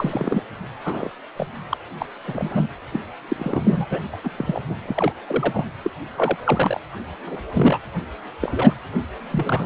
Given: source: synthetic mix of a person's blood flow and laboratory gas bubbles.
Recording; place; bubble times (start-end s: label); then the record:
Doppler ultrasound of blood flow; precordium
0.00-0.43 s: bubbles
0.84-1.11 s: bubbles
1.37-1.47 s: bubbles
1.69-1.77 s: bubbles
2.00-2.06 s: bubbles
2.27-2.67 s: bubbles
2.92-3.00 s: bubbles
3.28-3.85 s: bubbles
3.89-4.00 s: bubbles
4.12-4.17 s: bubbles
4.24-4.29 s: bubbles
4.38-4.60 s: bubbles
4.69-4.77 s: bubbles
4.85-5.12 s: bubbles
5.26-5.65 s: bubbles
5.83-5.91 s: bubbles
6.17-6.37 s: bubbles
6.44-6.80 s: bubbles
7.26-7.42 s: bubbles
7.54-7.80 s: bubbles
8.41-8.74 s: bubbles
9.31-9.65 s: bubbles
From the record:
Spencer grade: 3 (all of the cardiac periods contain showers or single bubble signals, but not dominating or overriding the cardiac motion signals); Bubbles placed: anywhere in the cardiac cycle